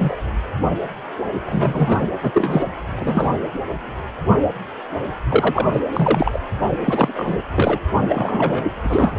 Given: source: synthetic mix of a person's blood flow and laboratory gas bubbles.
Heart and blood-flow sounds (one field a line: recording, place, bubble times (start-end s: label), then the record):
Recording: Doppler ultrasound of blood flow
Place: precordium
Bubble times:
0.00-0.16 s: bubbles
1.45-2.07 s: bubbles
2.23-2.67 s: bubbles
2.96-3.29 s: bubbles
5.29-5.70 s: bubbles
5.73-5.80 s: bubbles
5.93-6.39 s: bubbles
6.84-7.37 s: bubbles
7.54-7.79 s: bubbles
8.09-8.64 s: bubbles
8.82-9.19 s: bubbles
From the record:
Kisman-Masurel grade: 232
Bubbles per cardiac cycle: several, 3 to 8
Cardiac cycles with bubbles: 50 to 99%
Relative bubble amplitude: moderate (0.250 to 0.450)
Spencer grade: 3 (all of the cardiac periods contain showers or single bubble signals, but not dominating or overriding the cardiac motion signals)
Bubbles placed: anywhere in the cardiac cycle